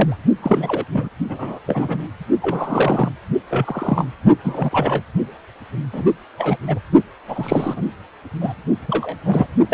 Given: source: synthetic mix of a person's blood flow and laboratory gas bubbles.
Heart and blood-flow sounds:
Doppler ultrasound of blood flow; precordium
0.00-0.17 s: bubbles
0.42-0.84 s: bubbles
0.93-1.08 s: bubbles
1.28-1.59 s: bubbles
1.67-2.07 s: bubbles
2.42-3.11 s: bubbles
3.50-4.05 s: bubbles
4.44-5.03 s: bubbles
5.93-6.07 s: bubbles
6.38-6.56 s: bubbles
6.67-6.79 s: bubbles
7.29-7.82 s: bubbles
8.41-8.53 s: bubbles
8.88-9.16 s: bubbles
9.25-9.46 s: bubbles
9.69-9.74 s: bubbles
From the record:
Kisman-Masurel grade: 242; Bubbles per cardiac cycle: several, 3 to 8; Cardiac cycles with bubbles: 100%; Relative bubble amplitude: moderate (0.250 to 0.450); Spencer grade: 3 (all of the cardiac periods contain showers or single bubble signals, but not dominating or overriding the cardiac motion signals); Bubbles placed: only in the low amplitude regions of the cardiac cycle

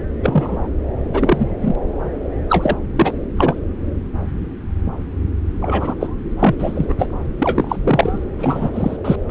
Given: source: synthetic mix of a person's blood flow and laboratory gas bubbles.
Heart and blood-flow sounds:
Doppler ultrasound of blood flow; subclavian vein
0.23-0.67 s: bubbles
1.13-1.48 s: bubbles
1.60-1.75 s: bubbles
2.49-2.77 s: bubbles
2.96-3.13 s: bubbles
3.37-3.56 s: bubbles
5.61-5.94 s: bubbles
6.00-6.07 s: bubbles
6.39-6.55 s: bubbles
6.58-6.94 s: bubbles
6.98-7.09 s: bubbles
7.38-8.18 s: bubbles
8.38-8.71 s: bubbles
8.73-8.96 s: bubbles
9.04-9.16 s: bubbles
9.29-9.31 s: bubbles
From the record:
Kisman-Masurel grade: 233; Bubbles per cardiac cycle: several, 3 to 8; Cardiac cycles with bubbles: 50 to 99%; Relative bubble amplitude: loud (0.450 to 0.775); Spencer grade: 3 (all of the cardiac periods contain showers or single bubble signals, but not dominating or overriding the cardiac motion signals); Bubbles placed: anywhere in the cardiac cycle

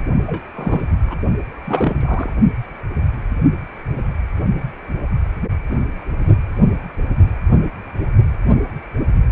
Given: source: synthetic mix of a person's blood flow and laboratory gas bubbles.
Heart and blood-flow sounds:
Doppler ultrasound of blood flow; precordium
0.27-0.43 s: bubbles
0.55-0.87 s: bubbles
1.06-1.17 s: bubbles
1.65-2.33 s: bubbles
From the record:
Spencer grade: 2 (many but less than half of the cardiac periods contain bubble signals, singularly or in groups); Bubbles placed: only in the low amplitude regions of the cardiac cycle

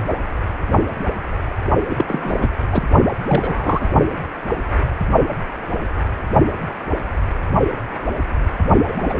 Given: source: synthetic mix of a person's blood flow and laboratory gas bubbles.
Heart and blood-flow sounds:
Doppler ultrasound of blood flow; precordium
1.89-2.05 s: bubbles
2.08-2.47 s: bubbles
2.70-2.83 s: bubbles
3.28-3.89 s: bubbles
8.88-8.94 s: bubbles
8.96-9.19 s: bubbles
From the record:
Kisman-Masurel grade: 222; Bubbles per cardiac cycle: several, 3 to 8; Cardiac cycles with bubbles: 10 to 50%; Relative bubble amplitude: moderate (0.250 to 0.450); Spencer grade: 2 (many but less than half of the cardiac periods contain bubble signals, singularly or in groups); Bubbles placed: only in the low amplitude regions of the cardiac cycle

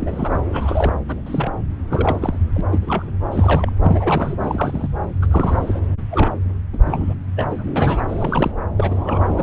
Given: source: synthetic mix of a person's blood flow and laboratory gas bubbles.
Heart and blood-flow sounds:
Doppler ultrasound of blood flow; subclavian vein
0.00-0.41 s: bubbles
0.51-0.93 s: bubbles
1.07-1.21 s: bubbles
1.26-1.52 s: bubbles
1.90-2.38 s: bubbles
2.54-2.61 s: bubbles
2.71-2.79 s: bubbles
2.82-3.11 s: bubbles
3.31-3.71 s: bubbles
3.83-4.88 s: bubbles
5.21-5.26 s: bubbles
5.30-5.79 s: bubbles
6.10-6.32 s: bubbles
6.73-6.78 s: bubbles
6.83-7.14 s: bubbles
7.36-7.64 s: bubbles
7.75-8.03 s: bubbles
8.09-8.52 s: bubbles
8.77-9.43 s: bubbles
From the record:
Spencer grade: 3 (all of the cardiac periods contain showers or single bubble signals, but not dominating or overriding the cardiac motion signals); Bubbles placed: anywhere in the cardiac cycle

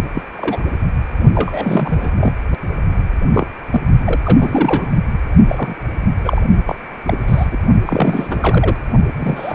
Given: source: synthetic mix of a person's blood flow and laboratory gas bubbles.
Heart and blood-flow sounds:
Doppler ultrasound of blood flow; precordium
0.13-0.22 s: bubbles
0.35-0.61 s: bubbles
1.34-2.10 s: bubbles
2.16-2.33 s: bubbles
3.32-3.47 s: bubbles
3.71-3.81 s: bubbles
4.02-4.90 s: bubbles
5.48-5.74 s: bubbles
6.18-6.42 s: bubbles
6.67-6.75 s: bubbles
7.04-7.18 s: bubbles
7.27-7.47 s: bubbles
7.51-7.57 s: bubbles
7.86-8.76 s: bubbles
9.16-9.55 s: bubbles
From the record:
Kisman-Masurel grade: 242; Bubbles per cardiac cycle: several, 3 to 8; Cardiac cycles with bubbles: 100%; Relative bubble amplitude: moderate (0.250 to 0.450); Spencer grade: 3 (all of the cardiac periods contain showers or single bubble signals, but not dominating or overriding the cardiac motion signals); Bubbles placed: only in the low amplitude regions of the cardiac cycle

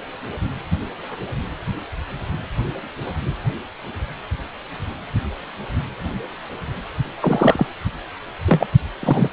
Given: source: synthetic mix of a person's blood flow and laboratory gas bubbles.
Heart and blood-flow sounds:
Doppler ultrasound of blood flow; precordium
7.20-7.67 s: bubbles
8.47-8.67 s: bubbles
9.00-9.28 s: bubbles
From the record:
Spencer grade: 2 (many but less than half of the cardiac periods contain bubble signals, singularly or in groups); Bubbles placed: anywhere in the cardiac cycle

